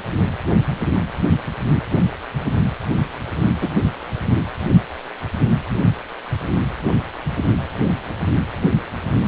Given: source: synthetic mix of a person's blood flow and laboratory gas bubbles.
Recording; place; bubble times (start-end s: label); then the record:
Doppler ultrasound of blood flow; precordium
3.61-3.69 s: bubbles
From the record:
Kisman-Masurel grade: 123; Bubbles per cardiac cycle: 1 to 2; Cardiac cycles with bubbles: 10 to 50%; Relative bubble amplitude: loud (0.450 to 0.775); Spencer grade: 2 (many but less than half of the cardiac periods contain bubble signals, singularly or in groups); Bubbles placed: anywhere in the cardiac cycle